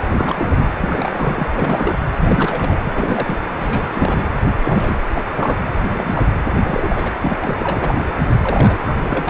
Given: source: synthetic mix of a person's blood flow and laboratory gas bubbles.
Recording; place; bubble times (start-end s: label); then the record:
Doppler ultrasound of blood flow; precordium
0.11-0.68 s: bubbles
0.81-1.47 s: bubbles
1.57-2.06 s: bubbles
2.18-2.80 s: bubbles
2.84-2.92 s: bubbles
2.95-3.39 s: bubbles
3.57-4.25 s: bubbles
4.45-4.53 s: bubbles
4.63-4.97 s: bubbles
5.10-5.23 s: bubbles
5.35-5.59 s: bubbles
5.82-6.29 s: bubbles
6.63-7.16 s: bubbles
7.21-7.51 s: bubbles
7.58-8.13 s: bubbles
8.43-9.30 s: bubbles
From the record:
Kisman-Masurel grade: 342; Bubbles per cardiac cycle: rolling drumbeat, 9 or more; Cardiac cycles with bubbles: 100%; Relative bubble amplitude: moderate (0.250 to 0.450); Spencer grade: 3 (all of the cardiac periods contain showers or single bubble signals, but not dominating or overriding the cardiac motion signals); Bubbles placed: anywhere in the cardiac cycle